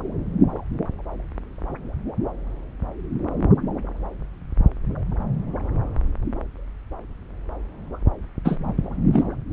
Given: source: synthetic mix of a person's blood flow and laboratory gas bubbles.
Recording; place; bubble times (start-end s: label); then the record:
Doppler ultrasound of blood flow; subclavian vein
8.45-8.57 s: bubbles
9.13-9.24 s: bubbles
From the record:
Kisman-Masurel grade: 113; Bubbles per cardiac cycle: 1 to 2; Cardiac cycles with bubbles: 1 to 10%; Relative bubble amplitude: loud (0.450 to 0.775); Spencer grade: 1 (occasional bubble signal discernible with the cardiac motion signal, with majority of cardiac periods free of bubbles); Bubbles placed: anywhere in the cardiac cycle